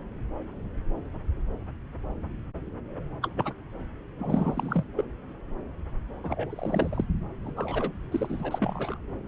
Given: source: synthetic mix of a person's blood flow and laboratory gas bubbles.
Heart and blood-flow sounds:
Doppler ultrasound of blood flow; subclavian vein
3.22-3.29 s: bubbles
3.36-3.52 s: bubbles
4.18-4.83 s: bubbles
4.98-5.03 s: bubbles
6.24-7.04 s: bubbles
7.45-7.52 s: bubbles
7.56-7.92 s: bubbles
8.11-8.99 s: bubbles
From the record:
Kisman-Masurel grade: 221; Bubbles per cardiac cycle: several, 3 to 8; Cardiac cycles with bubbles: 10 to 50%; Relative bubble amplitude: barely perceptible (0.100 to 0.250); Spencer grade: 2 (many but less than half of the cardiac periods contain bubble signals, singularly or in groups); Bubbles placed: anywhere in the cardiac cycle

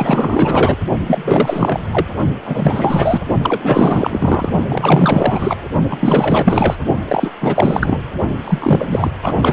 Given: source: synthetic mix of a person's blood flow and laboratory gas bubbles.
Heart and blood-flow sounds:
Doppler ultrasound of blood flow; precordium
0.00-0.78 s: bubbles
1.07-1.80 s: bubbles
1.92-2.06 s: bubbles
2.46-3.23 s: bubbles
3.42-4.50 s: bubbles
4.68-5.56 s: bubbles
5.89-6.76 s: bubbles
7.08-7.30 s: bubbles
7.41-7.98 s: bubbles
8.41-9.10 s: bubbles
9.22-9.53 s: bubbles
From the record:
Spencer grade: 4 (maximum detectable bubble signal sounding continuously throughout systole and diastole of every cardiac period, and overriding the amplitude of the normal cardiac signals); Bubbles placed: only in the low amplitude regions of the cardiac cycle

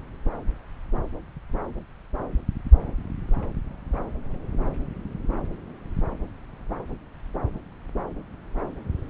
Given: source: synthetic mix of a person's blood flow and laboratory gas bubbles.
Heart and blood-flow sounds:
Doppler ultrasound of blood flow; subclavian vein
no bubbles
From the record:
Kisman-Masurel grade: 000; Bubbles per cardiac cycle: 0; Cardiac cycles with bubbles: 0%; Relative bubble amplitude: no bubbles discernible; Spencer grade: 0 (complete lack of bubble signals)

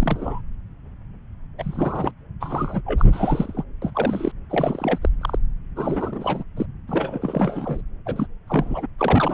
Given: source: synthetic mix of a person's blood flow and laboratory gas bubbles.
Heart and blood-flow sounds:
Doppler ultrasound of blood flow; subclavian vein
0.00-0.42 s: bubbles
1.58-2.12 s: bubbles
2.40-2.81 s: bubbles
2.85-3.05 s: bubbles
3.12-3.64 s: bubbles
3.82-4.32 s: bubbles
4.50-4.99 s: bubbles
5.01-5.09 s: bubbles
5.21-5.38 s: bubbles
5.75-6.43 s: bubbles
6.57-6.66 s: bubbles
6.87-7.81 s: bubbles
8.05-8.26 s: bubbles
8.47-8.87 s: bubbles
8.98-9.34 s: bubbles
From the record:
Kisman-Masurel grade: 332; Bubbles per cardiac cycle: rolling drumbeat, 9 or more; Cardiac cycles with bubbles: 50 to 99%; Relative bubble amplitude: moderate (0.250 to 0.450); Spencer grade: 3 (all of the cardiac periods contain showers or single bubble signals, but not dominating or overriding the cardiac motion signals); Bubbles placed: anywhere in the cardiac cycle

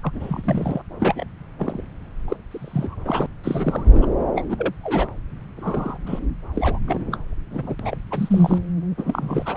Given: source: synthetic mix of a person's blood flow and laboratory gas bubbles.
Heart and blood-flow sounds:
Doppler ultrasound of blood flow; subclavian vein
0.02-0.82 s: bubbles
0.99-1.24 s: bubbles
1.58-1.82 s: bubbles
2.28-2.37 s: bubbles
2.51-2.96 s: bubbles
3.05-3.27 s: bubbles
3.44-4.07 s: bubbles
4.35-4.43 s: bubbles
4.49-4.73 s: bubbles
4.83-5.07 s: bubbles
5.56-5.98 s: bubbles
6.05-6.19 s: bubbles
6.54-6.79 s: bubbles
6.87-7.17 s: bubbles
7.51-7.75 s: bubbles
7.79-7.97 s: bubbles
8.11-8.58 s: bubbles
8.97-9.57 s: bubbles
From the record:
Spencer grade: 3 (all of the cardiac periods contain showers or single bubble signals, but not dominating or overriding the cardiac motion signals); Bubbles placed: anywhere in the cardiac cycle

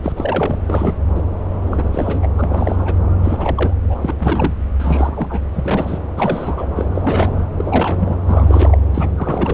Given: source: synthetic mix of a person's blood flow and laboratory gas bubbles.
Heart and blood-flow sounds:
Doppler ultrasound of blood flow; subclavian vein
0.03-0.12 s: bubbles
0.17-0.58 s: bubbles
0.67-0.93 s: bubbles
1.15-1.22 s: bubbles
1.50-1.89 s: bubbles
1.92-2.27 s: bubbles
2.35-2.99 s: bubbles
3.24-3.75 s: bubbles
3.83-3.98 s: bubbles
4.01-4.14 s: bubbles
4.20-4.54 s: bubbles
4.79-5.45 s: bubbles
5.53-6.04 s: bubbles
6.16-6.67 s: bubbles
6.75-6.85 s: bubbles
6.94-7.41 s: bubbles
7.54-8.17 s: bubbles
8.27-8.77 s: bubbles
8.94-9.10 s: bubbles
9.16-9.54 s: bubbles
From the record:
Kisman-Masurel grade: 342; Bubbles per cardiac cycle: rolling drumbeat, 9 or more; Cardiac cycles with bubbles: 100%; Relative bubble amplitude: moderate (0.250 to 0.450); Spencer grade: 3 (all of the cardiac periods contain showers or single bubble signals, but not dominating or overriding the cardiac motion signals); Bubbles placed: anywhere in the cardiac cycle

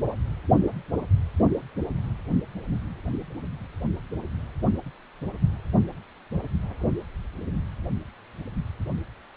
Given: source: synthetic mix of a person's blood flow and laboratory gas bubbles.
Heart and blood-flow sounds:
Doppler ultrasound of blood flow; precordium
no bubbles
From the record:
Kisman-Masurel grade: 000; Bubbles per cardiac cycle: 0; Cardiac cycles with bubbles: 0%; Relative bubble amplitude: no bubbles discernible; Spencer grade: 0 (complete lack of bubble signals)

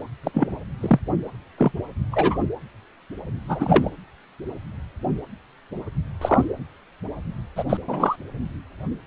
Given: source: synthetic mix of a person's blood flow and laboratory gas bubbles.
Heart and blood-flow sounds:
Doppler ultrasound of blood flow; precordium
0.23-0.31 s: bubbles
0.34-0.56 s: bubbles
0.81-0.99 s: bubbles
1.58-1.72 s: bubbles
2.12-2.39 s: bubbles
3.49-3.91 s: bubbles
6.21-6.44 s: bubbles
7.56-7.64 s: bubbles
7.69-7.77 s: bubbles
7.88-8.16 s: bubbles
From the record:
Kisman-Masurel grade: 122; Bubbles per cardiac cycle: 1 to 2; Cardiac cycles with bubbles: 10 to 50%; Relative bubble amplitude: moderate (0.250 to 0.450); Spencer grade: 2 (many but less than half of the cardiac periods contain bubble signals, singularly or in groups); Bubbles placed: anywhere in the cardiac cycle

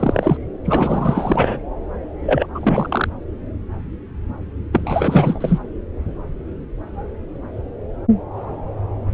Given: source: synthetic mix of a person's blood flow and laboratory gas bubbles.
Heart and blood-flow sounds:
Doppler ultrasound of blood flow; subclavian vein
0.00-0.37 s: bubbles
0.64-1.60 s: bubbles
2.23-2.47 s: bubbles
2.54-3.08 s: bubbles
4.72-5.58 s: bubbles
From the record:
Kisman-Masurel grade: 333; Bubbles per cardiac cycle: rolling drumbeat, 9 or more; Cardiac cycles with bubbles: 50 to 99%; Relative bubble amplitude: loud (0.450 to 0.775); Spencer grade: 3 (all of the cardiac periods contain showers or single bubble signals, but not dominating or overriding the cardiac motion signals); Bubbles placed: anywhere in the cardiac cycle

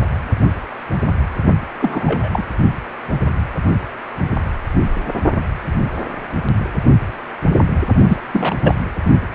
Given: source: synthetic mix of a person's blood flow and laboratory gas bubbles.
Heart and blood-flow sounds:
Doppler ultrasound of blood flow; precordium
1.80-2.29 s: bubbles
2.33-2.48 s: bubbles
8.09-8.21 s: bubbles
8.32-8.56 s: bubbles
8.62-8.75 s: bubbles
From the record:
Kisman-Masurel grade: 222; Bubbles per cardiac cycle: several, 3 to 8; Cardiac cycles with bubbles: 10 to 50%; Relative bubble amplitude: moderate (0.250 to 0.450); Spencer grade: 2 (many but less than half of the cardiac periods contain bubble signals, singularly or in groups); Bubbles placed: only in the low amplitude regions of the cardiac cycle

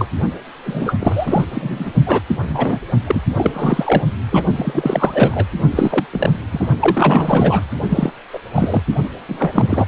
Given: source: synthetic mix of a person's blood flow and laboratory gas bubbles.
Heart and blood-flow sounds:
Doppler ultrasound of blood flow; precordium
0.00-0.05 s: bubbles
0.64-0.96 s: bubbles
0.99-1.44 s: bubbles
1.51-1.93 s: bubbles
2.06-2.24 s: bubbles
2.48-2.79 s: bubbles
3.06-3.21 s: bubbles
3.38-4.03 s: bubbles
4.30-4.42 s: bubbles
4.56-5.46 s: bubbles
5.71-6.05 s: bubbles
6.12-6.33 s: bubbles
6.52-6.67 s: bubbles
6.79-7.67 s: bubbles
7.90-8.12 s: bubbles
8.32-8.39 s: bubbles
8.54-8.82 s: bubbles
9.28-9.87 s: bubbles
From the record:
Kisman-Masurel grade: 343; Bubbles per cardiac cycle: rolling drumbeat, 9 or more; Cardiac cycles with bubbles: 100%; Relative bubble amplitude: loud (0.450 to 0.775); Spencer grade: 3 (all of the cardiac periods contain showers or single bubble signals, but not dominating or overriding the cardiac motion signals); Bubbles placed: only in the low amplitude regions of the cardiac cycle

